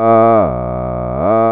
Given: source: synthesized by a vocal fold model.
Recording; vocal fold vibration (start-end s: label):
sustained vowel that changes in the middle
0.00-0.34 s: 113.1 Hz, open quotient 0.29
0.54-1.14 s: 61.6 Hz, open quotient 0.34
1.34-1.52 s: 113.1 Hz, open quotient 0.29